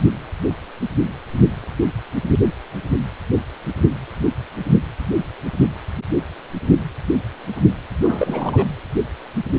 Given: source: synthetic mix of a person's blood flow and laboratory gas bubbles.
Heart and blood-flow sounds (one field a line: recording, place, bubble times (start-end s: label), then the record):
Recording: Doppler ultrasound of blood flow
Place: precordium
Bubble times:
8.04-8.68 s: bubbles
From the record:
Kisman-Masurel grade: 222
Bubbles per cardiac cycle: several, 3 to 8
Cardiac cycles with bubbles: 10 to 50%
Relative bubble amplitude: moderate (0.250 to 0.450)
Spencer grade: 2 (many but less than half of the cardiac periods contain bubble signals, singularly or in groups)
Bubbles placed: anywhere in the cardiac cycle